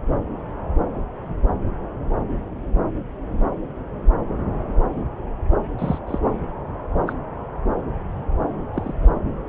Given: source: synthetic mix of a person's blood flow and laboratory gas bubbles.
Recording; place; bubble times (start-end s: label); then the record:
Doppler ultrasound of blood flow; subclavian vein
5.78-5.99 s: bubbles
6.07-6.19 s: bubbles
7.07-7.12 s: bubbles
8.74-8.93 s: bubbles
9.02-9.09 s: bubbles
From the record:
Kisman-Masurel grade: 122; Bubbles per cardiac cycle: 1 to 2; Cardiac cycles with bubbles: 10 to 50%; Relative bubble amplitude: moderate (0.250 to 0.450); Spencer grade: 2 (many but less than half of the cardiac periods contain bubble signals, singularly or in groups); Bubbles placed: anywhere in the cardiac cycle